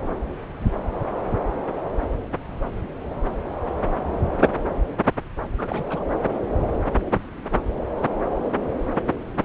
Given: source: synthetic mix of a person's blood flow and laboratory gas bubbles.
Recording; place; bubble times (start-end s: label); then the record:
Doppler ultrasound of blood flow; subclavian vein
5.57-5.86 s: bubbles
5.89-6.03 s: bubbles
From the record:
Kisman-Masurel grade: 211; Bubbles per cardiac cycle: several, 3 to 8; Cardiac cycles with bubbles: 1 to 10%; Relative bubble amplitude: barely perceptible (0.100 to 0.250); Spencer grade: 1 (occasional bubble signal discernible with the cardiac motion signal, with majority of cardiac periods free of bubbles); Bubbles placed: anywhere in the cardiac cycle